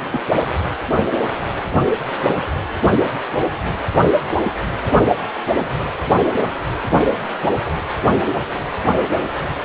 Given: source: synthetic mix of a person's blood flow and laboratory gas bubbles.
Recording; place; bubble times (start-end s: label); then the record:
Doppler ultrasound of blood flow; precordium
0.10-0.21 s: bubbles
From the record:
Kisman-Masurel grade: 111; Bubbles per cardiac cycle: 1 to 2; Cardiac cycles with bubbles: 1 to 10%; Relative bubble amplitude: barely perceptible (0.100 to 0.250); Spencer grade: 1 (occasional bubble signal discernible with the cardiac motion signal, with majority of cardiac periods free of bubbles); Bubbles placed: anywhere in the cardiac cycle